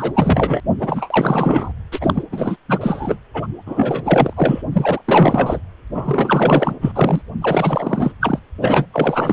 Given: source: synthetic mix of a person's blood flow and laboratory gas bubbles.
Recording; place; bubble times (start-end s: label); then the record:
Doppler ultrasound of blood flow; precordium
0.00-0.60 s: bubbles
0.79-1.71 s: bubbles
1.92-2.23 s: bubbles
2.32-2.56 s: bubbles
2.68-3.19 s: bubbles
3.33-3.48 s: bubbles
3.66-4.33 s: bubbles
4.36-4.62 s: bubbles
4.71-5.61 s: bubbles
5.94-7.22 s: bubbles
7.41-8.12 s: bubbles
8.20-8.39 s: bubbles
8.60-8.86 s: bubbles
8.93-9.33 s: bubbles
From the record:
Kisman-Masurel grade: 444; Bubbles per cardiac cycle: continuous sound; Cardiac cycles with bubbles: 100%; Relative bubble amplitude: maximal (0.775 to 0.999); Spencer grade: 4 (maximum detectable bubble signal sounding continuously throughout systole and diastole of every cardiac period, and overriding the amplitude of the normal cardiac signals); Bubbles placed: anywhere in the cardiac cycle